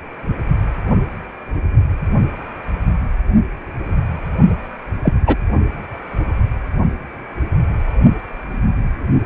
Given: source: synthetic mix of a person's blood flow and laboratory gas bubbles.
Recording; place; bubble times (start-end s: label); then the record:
Doppler ultrasound of blood flow; precordium
5.02-5.13 s: bubbles
5.26-5.35 s: bubbles
From the record:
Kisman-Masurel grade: 113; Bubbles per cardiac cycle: 1 to 2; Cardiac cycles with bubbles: 1 to 10%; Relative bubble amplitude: loud (0.450 to 0.775); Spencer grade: 1 (occasional bubble signal discernible with the cardiac motion signal, with majority of cardiac periods free of bubbles); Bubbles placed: only in the low amplitude regions of the cardiac cycle